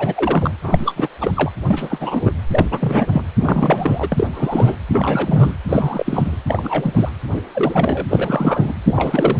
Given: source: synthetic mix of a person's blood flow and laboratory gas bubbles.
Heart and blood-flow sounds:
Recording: Doppler ultrasound of blood flow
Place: precordium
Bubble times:
0.00-0.53 s: bubbles
0.63-1.08 s: bubbles
1.21-1.32 s: bubbles
1.34-1.52 s: bubbles
1.68-2.37 s: bubbles
2.52-3.25 s: bubbles
3.39-4.09 s: bubbles
4.12-4.28 s: bubbles
4.33-4.76 s: bubbles
4.92-5.54 s: bubbles
5.68-6.36 s: bubbles
6.47-7.11 s: bubbles
7.33-7.42 s: bubbles
7.54-8.06 s: bubbles
8.11-8.73 s: bubbles
8.88-8.93 s: bubbles
8.96-9.37 s: bubbles
From the record:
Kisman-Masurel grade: 342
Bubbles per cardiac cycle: rolling drumbeat, 9 or more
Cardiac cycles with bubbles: 100%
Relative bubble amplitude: moderate (0.250 to 0.450)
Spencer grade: 3 (all of the cardiac periods contain showers or single bubble signals, but not dominating or overriding the cardiac motion signals)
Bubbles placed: anywhere in the cardiac cycle

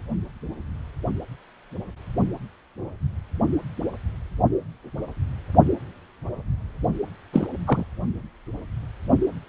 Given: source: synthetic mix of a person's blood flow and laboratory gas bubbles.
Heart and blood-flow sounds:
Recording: Doppler ultrasound of blood flow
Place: precordium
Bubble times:
7.33-7.47 s: bubbles
7.67-7.84 s: bubbles
From the record:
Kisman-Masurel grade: 113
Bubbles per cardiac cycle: 1 to 2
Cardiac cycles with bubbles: 1 to 10%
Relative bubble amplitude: loud (0.450 to 0.775)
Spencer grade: 1 (occasional bubble signal discernible with the cardiac motion signal, with majority of cardiac periods free of bubbles)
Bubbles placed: only in the low amplitude regions of the cardiac cycle

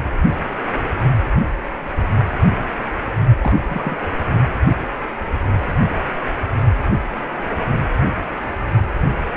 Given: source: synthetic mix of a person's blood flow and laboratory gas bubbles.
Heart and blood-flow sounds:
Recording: Doppler ultrasound of blood flow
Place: precordium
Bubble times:
3.42-3.56 s: bubbles
3.69-3.95 s: bubbles
From the record:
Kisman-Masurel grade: 212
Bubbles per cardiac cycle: several, 3 to 8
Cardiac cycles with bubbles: 1 to 10%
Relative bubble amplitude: moderate (0.250 to 0.450)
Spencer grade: 1 (occasional bubble signal discernible with the cardiac motion signal, with majority of cardiac periods free of bubbles)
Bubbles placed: only in the low amplitude regions of the cardiac cycle

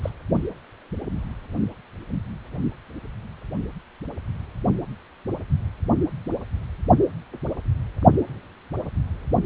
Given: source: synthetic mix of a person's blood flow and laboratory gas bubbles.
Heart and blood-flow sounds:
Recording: Doppler ultrasound of blood flow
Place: precordium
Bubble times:
0.03-0.10 s: bubbles
From the record:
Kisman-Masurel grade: 211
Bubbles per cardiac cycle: several, 3 to 8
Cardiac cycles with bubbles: 1 to 10%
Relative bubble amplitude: barely perceptible (0.100 to 0.250)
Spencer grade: 1 (occasional bubble signal discernible with the cardiac motion signal, with majority of cardiac periods free of bubbles)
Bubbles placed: only in the low amplitude regions of the cardiac cycle

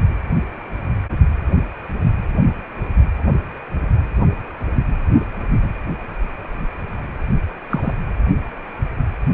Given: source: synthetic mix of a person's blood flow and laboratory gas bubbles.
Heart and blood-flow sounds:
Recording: Doppler ultrasound of blood flow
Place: precordium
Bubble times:
7.71-7.94 s: bubbles
From the record:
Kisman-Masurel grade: 112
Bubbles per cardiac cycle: 1 to 2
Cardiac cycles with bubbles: 1 to 10%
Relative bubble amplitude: moderate (0.250 to 0.450)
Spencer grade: 1 (occasional bubble signal discernible with the cardiac motion signal, with majority of cardiac periods free of bubbles)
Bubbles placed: only in the low amplitude regions of the cardiac cycle

